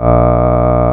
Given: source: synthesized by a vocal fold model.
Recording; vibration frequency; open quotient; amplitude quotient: sustained vowel; 60 Hz; 0.4; 1